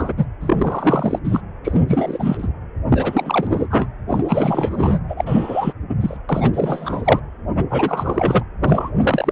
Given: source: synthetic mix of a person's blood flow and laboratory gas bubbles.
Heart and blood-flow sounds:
Doppler ultrasound of blood flow; precordium
0.00-0.14 s: bubbles
0.16-0.25 s: bubbles
0.40-1.19 s: bubbles
1.24-1.41 s: bubbles
1.64-1.81 s: bubbles
1.87-2.48 s: bubbles
2.89-3.88 s: bubbles
4.08-5.00 s: bubbles
5.08-5.73 s: bubbles
5.89-5.95 s: bubbles
6.00-6.17 s: bubbles
6.29-7.20 s: bubbles
7.55-7.65 s: bubbles
7.70-8.46 s: bubbles
8.59-8.90 s: bubbles
8.97-9.32 s: bubbles
From the record:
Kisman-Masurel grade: 343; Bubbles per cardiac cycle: rolling drumbeat, 9 or more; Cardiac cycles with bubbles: 100%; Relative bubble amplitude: loud (0.450 to 0.775); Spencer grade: 3 (all of the cardiac periods contain showers or single bubble signals, but not dominating or overriding the cardiac motion signals); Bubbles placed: anywhere in the cardiac cycle

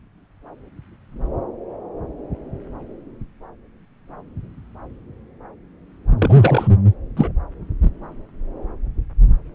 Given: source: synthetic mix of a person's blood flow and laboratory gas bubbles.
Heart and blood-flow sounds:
Doppler ultrasound of blood flow; subclavian vein
6.19-6.67 s: bubbles
7.17-7.32 s: bubbles
From the record:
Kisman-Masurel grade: 123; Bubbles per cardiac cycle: 1 to 2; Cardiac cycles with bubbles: 10 to 50%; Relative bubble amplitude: loud (0.450 to 0.775); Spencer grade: 2 (many but less than half of the cardiac periods contain bubble signals, singularly or in groups); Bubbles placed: anywhere in the cardiac cycle

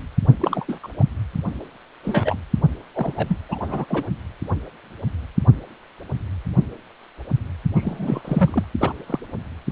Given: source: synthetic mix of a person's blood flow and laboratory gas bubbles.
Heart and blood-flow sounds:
Doppler ultrasound of blood flow; precordium
0.40-0.65 s: bubbles
0.68-0.79 s: bubbles
0.83-0.88 s: bubbles
0.99-1.04 s: bubbles
2.04-2.38 s: bubbles
2.94-3.37 s: bubbles
3.49-3.59 s: bubbles
3.61-3.86 s: bubbles
3.88-4.07 s: bubbles
7.75-8.21 s: bubbles
8.24-8.65 s: bubbles
8.79-8.92 s: bubbles
9.06-9.20 s: bubbles
From the record:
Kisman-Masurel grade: 232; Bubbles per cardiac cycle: several, 3 to 8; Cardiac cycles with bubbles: 50 to 99%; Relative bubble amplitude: moderate (0.250 to 0.450); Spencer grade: 3 (all of the cardiac periods contain showers or single bubble signals, but not dominating or overriding the cardiac motion signals); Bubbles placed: only in the low amplitude regions of the cardiac cycle

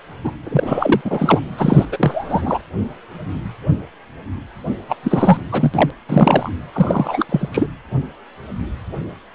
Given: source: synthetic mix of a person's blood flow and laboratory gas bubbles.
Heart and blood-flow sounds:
Doppler ultrasound of blood flow; precordium
0.24-0.31 s: bubbles
0.43-1.01 s: bubbles
1.04-1.41 s: bubbles
1.58-1.85 s: bubbles
1.92-2.62 s: bubbles
4.89-4.96 s: bubbles
5.03-5.37 s: bubbles
5.51-5.91 s: bubbles
6.08-6.50 s: bubbles
6.73-7.26 s: bubbles
7.29-7.49 s: bubbles
7.52-7.67 s: bubbles
From the record:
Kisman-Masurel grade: 333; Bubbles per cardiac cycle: rolling drumbeat, 9 or more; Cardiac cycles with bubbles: 50 to 99%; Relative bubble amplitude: loud (0.450 to 0.775); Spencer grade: 3 (all of the cardiac periods contain showers or single bubble signals, but not dominating or overriding the cardiac motion signals); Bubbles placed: anywhere in the cardiac cycle

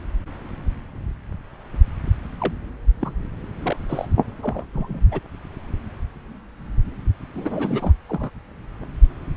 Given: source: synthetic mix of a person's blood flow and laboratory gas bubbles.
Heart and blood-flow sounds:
Doppler ultrasound of blood flow; subclavian vein
2.40-2.53 s: bubbles
3.00-3.12 s: bubbles
3.62-3.77 s: bubbles
3.88-4.06 s: bubbles
4.42-4.65 s: bubbles
4.73-5.00 s: bubbles
5.12-5.20 s: bubbles
7.34-7.93 s: bubbles
8.09-8.30 s: bubbles
From the record:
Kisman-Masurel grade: 222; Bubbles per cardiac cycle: several, 3 to 8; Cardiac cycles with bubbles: 10 to 50%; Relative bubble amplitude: moderate (0.250 to 0.450); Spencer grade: 2 (many but less than half of the cardiac periods contain bubble signals, singularly or in groups); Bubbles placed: anywhere in the cardiac cycle

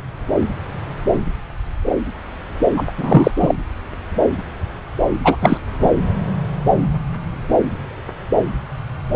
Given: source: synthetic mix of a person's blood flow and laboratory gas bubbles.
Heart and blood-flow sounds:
Doppler ultrasound of blood flow; subclavian vein
2.77-2.84 s: bubbles
2.97-3.31 s: bubbles
3.40-3.55 s: bubbles
5.24-5.36 s: bubbles
5.41-5.57 s: bubbles
5.81-5.90 s: bubbles
From the record:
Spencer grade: 1 (occasional bubble signal discernible with the cardiac motion signal, with majority of cardiac periods free of bubbles); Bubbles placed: anywhere in the cardiac cycle

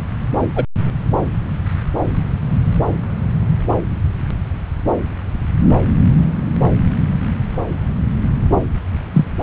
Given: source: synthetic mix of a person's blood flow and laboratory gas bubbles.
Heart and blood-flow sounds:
Doppler ultrasound of blood flow; subclavian vein
0.55-0.64 s: bubbles
9.13-9.26 s: bubbles
9.41-9.43 s: bubbles
From the record:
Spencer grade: 2 (many but less than half of the cardiac periods contain bubble signals, singularly or in groups); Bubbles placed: anywhere in the cardiac cycle

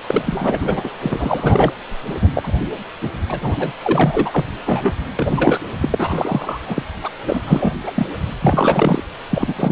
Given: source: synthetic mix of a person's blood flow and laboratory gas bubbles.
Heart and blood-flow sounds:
Doppler ultrasound of blood flow; precordium
0.07-0.89 s: bubbles
1.02-1.73 s: bubbles
2.21-2.28 s: bubbles
2.34-2.52 s: bubbles
3.02-3.08 s: bubbles
3.29-3.73 s: bubbles
3.82-4.52 s: bubbles
4.66-4.94 s: bubbles
5.16-5.61 s: bubbles
5.81-6.83 s: bubbles
7.03-7.08 s: bubbles
7.26-7.42 s: bubbles
7.47-7.71 s: bubbles
7.87-7.92 s: bubbles
7.95-8.06 s: bubbles
8.41-9.03 s: bubbles
9.29-9.72 s: bubbles
From the record:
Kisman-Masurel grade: 343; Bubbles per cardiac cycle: rolling drumbeat, 9 or more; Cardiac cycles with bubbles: 100%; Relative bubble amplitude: loud (0.450 to 0.775); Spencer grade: 3 (all of the cardiac periods contain showers or single bubble signals, but not dominating or overriding the cardiac motion signals); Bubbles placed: anywhere in the cardiac cycle

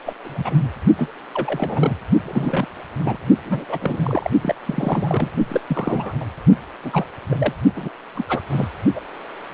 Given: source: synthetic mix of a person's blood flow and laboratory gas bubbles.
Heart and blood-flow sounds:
Doppler ultrasound of blood flow; precordium
0.06-0.14 s: bubbles
0.24-0.54 s: bubbles
0.97-1.08 s: bubbles
1.34-1.94 s: bubbles
2.25-2.66 s: bubbles
2.98-3.18 s: bubbles
3.44-3.65 s: bubbles
3.69-3.78 s: bubbles
3.81-4.30 s: bubbles
4.41-4.55 s: bubbles
4.65-5.31 s: bubbles
5.48-5.61 s: bubbles
5.67-6.17 s: bubbles
6.20-6.26 s: bubbles
6.84-7.05 s: bubbles
7.30-7.52 s: bubbles
7.75-7.90 s: bubbles
8.15-8.25 s: bubbles
8.29-8.41 s: bubbles
8.50-8.68 s: bubbles
8.95-9.02 s: bubbles
From the record:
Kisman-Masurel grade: 242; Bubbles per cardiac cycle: several, 3 to 8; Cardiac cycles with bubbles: 100%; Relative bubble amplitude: moderate (0.250 to 0.450); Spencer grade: 3 (all of the cardiac periods contain showers or single bubble signals, but not dominating or overriding the cardiac motion signals); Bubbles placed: only in the low amplitude regions of the cardiac cycle

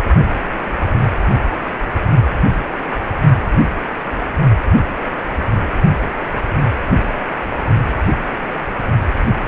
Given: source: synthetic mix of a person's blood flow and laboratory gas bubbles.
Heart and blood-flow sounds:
Doppler ultrasound of blood flow; precordium
0.00-0.02 s: bubbles
From the record:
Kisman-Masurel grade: 212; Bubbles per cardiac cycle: several, 3 to 8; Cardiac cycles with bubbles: 1 to 10%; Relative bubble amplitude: moderate (0.250 to 0.450); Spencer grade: 1 (occasional bubble signal discernible with the cardiac motion signal, with majority of cardiac periods free of bubbles); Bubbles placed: only in the low amplitude regions of the cardiac cycle

